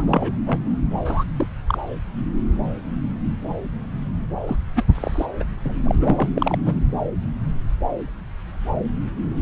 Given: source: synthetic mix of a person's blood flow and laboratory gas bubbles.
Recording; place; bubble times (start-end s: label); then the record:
Doppler ultrasound of blood flow; subclavian vein
0.00-0.32 s: bubbles
0.46-0.60 s: bubbles
1.05-1.24 s: bubbles
1.36-1.47 s: bubbles
1.67-1.78 s: bubbles
4.47-4.56 s: bubbles
4.75-4.83 s: bubbles
4.95-5.25 s: bubbles
5.40-5.44 s: bubbles
5.65-5.73 s: bubbles
5.83-5.95 s: bubbles
6.00-6.29 s: bubbles
6.36-6.58 s: bubbles
6.66-6.75 s: bubbles
From the record:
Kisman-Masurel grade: 232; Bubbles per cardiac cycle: several, 3 to 8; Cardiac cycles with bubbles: 50 to 99%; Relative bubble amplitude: moderate (0.250 to 0.450); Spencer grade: 3 (all of the cardiac periods contain showers or single bubble signals, but not dominating or overriding the cardiac motion signals); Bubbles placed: anywhere in the cardiac cycle